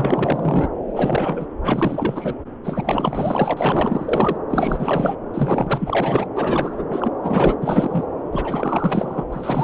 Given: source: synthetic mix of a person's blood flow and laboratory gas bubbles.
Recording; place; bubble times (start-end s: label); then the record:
Doppler ultrasound of blood flow; subclavian vein
0.00-0.70 s: bubbles
0.87-1.47 s: bubbles
1.64-2.36 s: bubbles
2.63-3.54 s: bubbles
3.57-4.38 s: bubbles
4.50-5.15 s: bubbles
5.33-6.29 s: bubbles
6.35-6.84 s: bubbles
6.90-7.12 s: bubbles
7.23-7.56 s: bubbles
7.61-8.04 s: bubbles
8.32-9.24 s: bubbles
9.32-9.64 s: bubbles
From the record:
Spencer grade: 4 (maximum detectable bubble signal sounding continuously throughout systole and diastole of every cardiac period, and overriding the amplitude of the normal cardiac signals); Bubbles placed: anywhere in the cardiac cycle